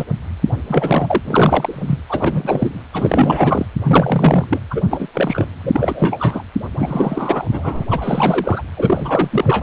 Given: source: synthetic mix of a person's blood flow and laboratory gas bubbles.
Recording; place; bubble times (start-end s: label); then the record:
Doppler ultrasound of blood flow; precordium
0.00-0.04 s: bubbles
0.67-1.21 s: bubbles
1.25-2.01 s: bubbles
2.09-2.82 s: bubbles
2.93-3.66 s: bubbles
3.83-4.45 s: bubbles
4.50-4.60 s: bubbles
4.71-4.82 s: bubbles
4.90-5.08 s: bubbles
5.14-5.46 s: bubbles
5.63-6.44 s: bubbles
6.79-7.47 s: bubbles
7.52-7.84 s: bubbles
7.91-8.62 s: bubbles
8.76-9.62 s: bubbles
From the record:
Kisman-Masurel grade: 343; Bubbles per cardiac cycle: rolling drumbeat, 9 or more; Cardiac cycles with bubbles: 100%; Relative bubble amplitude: loud (0.450 to 0.775); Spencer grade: 3 (all of the cardiac periods contain showers or single bubble signals, but not dominating or overriding the cardiac motion signals); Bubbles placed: anywhere in the cardiac cycle